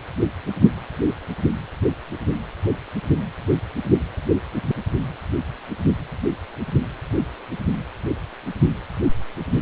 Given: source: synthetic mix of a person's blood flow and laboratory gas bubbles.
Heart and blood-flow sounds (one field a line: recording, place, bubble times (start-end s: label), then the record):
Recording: Doppler ultrasound of blood flow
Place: precordium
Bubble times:
no bubbles
From the record:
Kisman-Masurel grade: 000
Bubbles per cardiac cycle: 0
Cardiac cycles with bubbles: 0%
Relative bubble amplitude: no bubbles discernible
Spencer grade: 0 (complete lack of bubble signals)